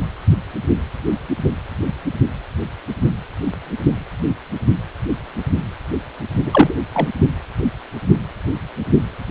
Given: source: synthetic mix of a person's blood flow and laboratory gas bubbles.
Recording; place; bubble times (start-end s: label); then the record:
Doppler ultrasound of blood flow; precordium
6.46-6.74 s: bubbles
6.92-7.10 s: bubbles
From the record:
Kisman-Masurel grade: 213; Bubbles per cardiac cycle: several, 3 to 8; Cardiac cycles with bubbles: 1 to 10%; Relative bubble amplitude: loud (0.450 to 0.775); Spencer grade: 1 (occasional bubble signal discernible with the cardiac motion signal, with majority of cardiac periods free of bubbles); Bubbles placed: only in the low amplitude regions of the cardiac cycle